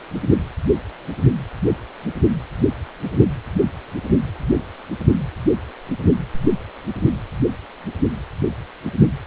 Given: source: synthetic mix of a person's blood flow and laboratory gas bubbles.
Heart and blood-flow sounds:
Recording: Doppler ultrasound of blood flow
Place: precordium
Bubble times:
no bubbles
From the record:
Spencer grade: 0 (complete lack of bubble signals)

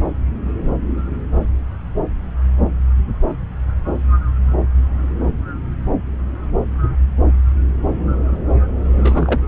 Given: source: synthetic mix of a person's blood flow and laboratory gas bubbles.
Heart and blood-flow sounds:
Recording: Doppler ultrasound of blood flow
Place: subclavian vein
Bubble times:
8.96-9.41 s: bubbles
From the record:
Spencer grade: 2 (many but less than half of the cardiac periods contain bubble signals, singularly or in groups)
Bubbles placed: anywhere in the cardiac cycle

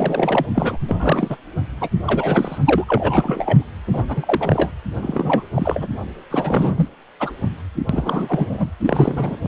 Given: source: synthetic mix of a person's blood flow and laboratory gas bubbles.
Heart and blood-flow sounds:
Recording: Doppler ultrasound of blood flow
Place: precordium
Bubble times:
0.00-0.46 s: bubbles
0.55-0.77 s: bubbles
0.88-1.37 s: bubbles
1.81-1.88 s: bubbles
2.06-2.58 s: bubbles
2.65-2.84 s: bubbles
2.86-3.63 s: bubbles
3.87-4.04 s: bubbles
4.08-4.71 s: bubbles
5.02-5.46 s: bubbles
5.55-5.88 s: bubbles
6.31-6.89 s: bubbles
7.20-7.33 s: bubbles
7.89-8.70 s: bubbles
8.80-9.37 s: bubbles
9.43-9.47 s: bubbles
From the record:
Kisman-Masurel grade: 343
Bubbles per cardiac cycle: rolling drumbeat, 9 or more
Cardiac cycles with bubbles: 100%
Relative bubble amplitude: loud (0.450 to 0.775)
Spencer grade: 3 (all of the cardiac periods contain showers or single bubble signals, but not dominating or overriding the cardiac motion signals)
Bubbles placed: anywhere in the cardiac cycle

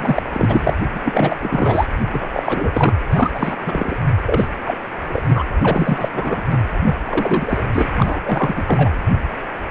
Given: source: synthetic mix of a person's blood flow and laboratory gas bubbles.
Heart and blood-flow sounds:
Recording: Doppler ultrasound of blood flow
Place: precordium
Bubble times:
0.00-0.23 s: bubbles
0.33-0.74 s: bubbles
0.94-1.01 s: bubbles
1.05-1.36 s: bubbles
1.40-1.86 s: bubbles
2.11-2.27 s: bubbles
2.33-2.95 s: bubbles
3.11-3.31 s: bubbles
3.34-3.56 s: bubbles
3.66-3.97 s: bubbles
4.26-4.47 s: bubbles
4.65-4.78 s: bubbles
5.09-5.22 s: bubbles
5.27-5.45 s: bubbles
5.61-6.08 s: bubbles
6.13-6.42 s: bubbles
6.50-6.63 s: bubbles
6.84-6.96 s: bubbles
7.05-7.62 s: bubbles
7.72-7.87 s: bubbles
7.96-8.21 s: bubbles
8.23-8.90 s: bubbles
From the record:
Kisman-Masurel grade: 333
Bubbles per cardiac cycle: rolling drumbeat, 9 or more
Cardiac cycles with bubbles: 50 to 99%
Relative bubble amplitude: loud (0.450 to 0.775)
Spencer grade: 3 (all of the cardiac periods contain showers or single bubble signals, but not dominating or overriding the cardiac motion signals)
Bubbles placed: anywhere in the cardiac cycle

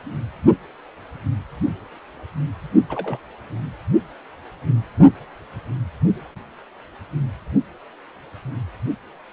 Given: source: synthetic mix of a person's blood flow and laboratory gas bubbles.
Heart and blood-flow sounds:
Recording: Doppler ultrasound of blood flow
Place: precordium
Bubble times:
2.89-3.19 s: bubbles
From the record:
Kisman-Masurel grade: 211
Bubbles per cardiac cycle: several, 3 to 8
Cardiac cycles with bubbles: 1 to 10%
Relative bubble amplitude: barely perceptible (0.100 to 0.250)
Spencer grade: 1 (occasional bubble signal discernible with the cardiac motion signal, with majority of cardiac periods free of bubbles)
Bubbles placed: only in the low amplitude regions of the cardiac cycle

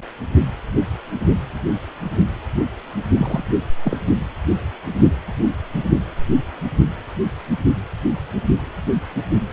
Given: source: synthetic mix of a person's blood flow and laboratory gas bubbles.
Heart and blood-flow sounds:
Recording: Doppler ultrasound of blood flow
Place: precordium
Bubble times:
3.18-3.43 s: bubbles
3.84-3.97 s: bubbles
From the record:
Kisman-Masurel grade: 212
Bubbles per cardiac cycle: several, 3 to 8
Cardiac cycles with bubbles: 1 to 10%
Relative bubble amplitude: moderate (0.250 to 0.450)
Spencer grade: 1 (occasional bubble signal discernible with the cardiac motion signal, with majority of cardiac periods free of bubbles)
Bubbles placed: only in the low amplitude regions of the cardiac cycle

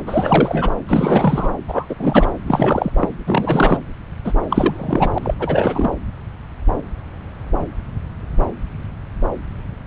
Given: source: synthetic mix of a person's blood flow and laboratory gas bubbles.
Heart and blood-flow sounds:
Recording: Doppler ultrasound of blood flow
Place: subclavian vein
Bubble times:
0.06-0.73 s: bubbles
0.88-1.48 s: bubbles
1.68-1.86 s: bubbles
1.89-1.95 s: bubbles
2.00-2.29 s: bubbles
2.46-3.08 s: bubbles
3.27-3.78 s: bubbles
4.25-4.33 s: bubbles
4.50-5.10 s: bubbles
5.14-5.19 s: bubbles
5.22-5.34 s: bubbles
5.39-5.90 s: bubbles
From the record:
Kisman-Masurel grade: 333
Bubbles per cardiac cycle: rolling drumbeat, 9 or more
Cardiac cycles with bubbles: 50 to 99%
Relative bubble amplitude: loud (0.450 to 0.775)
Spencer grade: 3 (all of the cardiac periods contain showers or single bubble signals, but not dominating or overriding the cardiac motion signals)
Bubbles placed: anywhere in the cardiac cycle

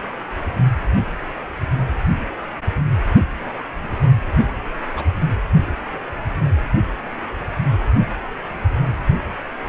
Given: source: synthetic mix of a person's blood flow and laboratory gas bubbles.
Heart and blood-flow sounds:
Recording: Doppler ultrasound of blood flow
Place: precordium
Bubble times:
4.89-5.08 s: bubbles
From the record:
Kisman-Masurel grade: 121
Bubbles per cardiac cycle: 1 to 2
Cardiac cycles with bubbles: 10 to 50%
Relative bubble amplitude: barely perceptible (0.100 to 0.250)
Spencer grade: 2 (many but less than half of the cardiac periods contain bubble signals, singularly or in groups)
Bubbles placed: anywhere in the cardiac cycle

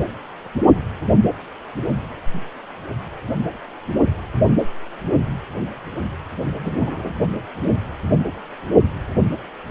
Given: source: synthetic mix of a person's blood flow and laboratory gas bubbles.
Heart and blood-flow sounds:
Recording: Doppler ultrasound of blood flow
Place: precordium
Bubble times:
6.64-7.15 s: bubbles
From the record:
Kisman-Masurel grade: 122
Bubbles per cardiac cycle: 1 to 2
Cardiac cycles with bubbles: 10 to 50%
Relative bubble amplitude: moderate (0.250 to 0.450)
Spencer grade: 2 (many but less than half of the cardiac periods contain bubble signals, singularly or in groups)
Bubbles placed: only in the low amplitude regions of the cardiac cycle

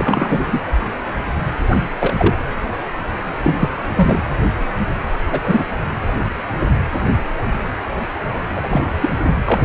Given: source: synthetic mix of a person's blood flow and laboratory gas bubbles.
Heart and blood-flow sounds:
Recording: Doppler ultrasound of blood flow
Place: precordium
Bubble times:
0.00-0.60 s: bubbles
1.71-1.76 s: bubbles
2.00-2.14 s: bubbles
2.17-2.35 s: bubbles
3.44-3.56 s: bubbles
3.58-3.69 s: bubbles
3.95-4.21 s: bubbles
5.28-5.41 s: bubbles
5.43-5.64 s: bubbles
8.56-8.83 s: bubbles
9.01-9.09 s: bubbles
9.45-9.59 s: bubbles
From the record:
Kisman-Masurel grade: 233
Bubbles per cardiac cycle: several, 3 to 8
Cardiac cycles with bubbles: 50 to 99%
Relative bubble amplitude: loud (0.450 to 0.775)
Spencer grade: 3 (all of the cardiac periods contain showers or single bubble signals, but not dominating or overriding the cardiac motion signals)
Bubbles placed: anywhere in the cardiac cycle

